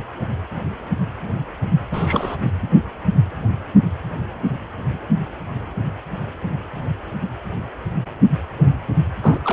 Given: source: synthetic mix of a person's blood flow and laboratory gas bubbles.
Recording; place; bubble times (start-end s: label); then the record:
Doppler ultrasound of blood flow; precordium
1.92-2.37 s: bubbles
2.41-2.50 s: bubbles
9.22-9.40 s: bubbles
9.44-9.52 s: bubbles
From the record:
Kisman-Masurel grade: 222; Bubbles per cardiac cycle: several, 3 to 8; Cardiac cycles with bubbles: 10 to 50%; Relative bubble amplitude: moderate (0.250 to 0.450); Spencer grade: 2 (many but less than half of the cardiac periods contain bubble signals, singularly or in groups); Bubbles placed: anywhere in the cardiac cycle